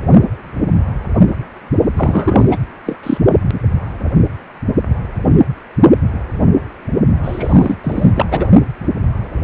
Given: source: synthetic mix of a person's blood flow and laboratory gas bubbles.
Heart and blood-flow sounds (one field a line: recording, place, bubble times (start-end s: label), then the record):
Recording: Doppler ultrasound of blood flow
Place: precordium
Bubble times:
1.96-2.58 s: bubbles
2.86-2.96 s: bubbles
3.03-3.17 s: bubbles
7.23-7.77 s: bubbles
7.83-8.12 s: bubbles
8.15-8.26 s: bubbles
8.30-8.47 s: bubbles
From the record:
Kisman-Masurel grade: 223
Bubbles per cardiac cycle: several, 3 to 8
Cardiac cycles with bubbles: 10 to 50%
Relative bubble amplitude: loud (0.450 to 0.775)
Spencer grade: 2 (many but less than half of the cardiac periods contain bubble signals, singularly or in groups)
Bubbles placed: only in the low amplitude regions of the cardiac cycle